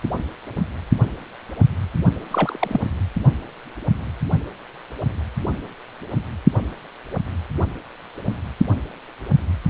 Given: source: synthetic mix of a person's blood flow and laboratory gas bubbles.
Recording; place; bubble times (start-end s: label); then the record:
Doppler ultrasound of blood flow; precordium
2.31-2.80 s: bubbles
From the record:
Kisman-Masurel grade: 222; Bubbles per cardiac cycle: several, 3 to 8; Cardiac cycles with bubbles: 10 to 50%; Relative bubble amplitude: moderate (0.250 to 0.450); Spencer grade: 2 (many but less than half of the cardiac periods contain bubble signals, singularly or in groups); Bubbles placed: anywhere in the cardiac cycle